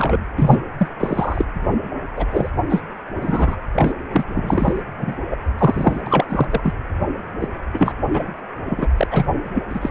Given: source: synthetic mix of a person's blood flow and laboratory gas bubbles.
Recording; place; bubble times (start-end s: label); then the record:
Doppler ultrasound of blood flow; precordium
0.00-0.25 s: bubbles
0.36-0.62 s: bubbles
0.78-0.90 s: bubbles
0.99-1.47 s: bubbles
2.16-2.26 s: bubbles
2.31-2.50 s: bubbles
2.70-2.83 s: bubbles
3.21-3.57 s: bubbles
3.73-3.93 s: bubbles
4.12-4.24 s: bubbles
4.27-4.82 s: bubbles
4.97-5.16 s: bubbles
5.30-5.36 s: bubbles
5.58-6.01 s: bubbles
6.06-6.26 s: bubbles
6.29-6.47 s: bubbles
6.50-6.73 s: bubbles
7.40-7.48 s: bubbles
7.73-7.92 s: bubbles
8.13-8.27 s: bubbles
8.66-8.87 s: bubbles
8.97-9.07 s: bubbles
9.11-9.26 s: bubbles
9.54-9.62 s: bubbles
9.70-9.90 s: bubbles
From the record:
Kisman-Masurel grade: 343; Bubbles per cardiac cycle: rolling drumbeat, 9 or more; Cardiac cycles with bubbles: 100%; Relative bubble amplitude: loud (0.450 to 0.775); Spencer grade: 3 (all of the cardiac periods contain showers or single bubble signals, but not dominating or overriding the cardiac motion signals); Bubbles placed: anywhere in the cardiac cycle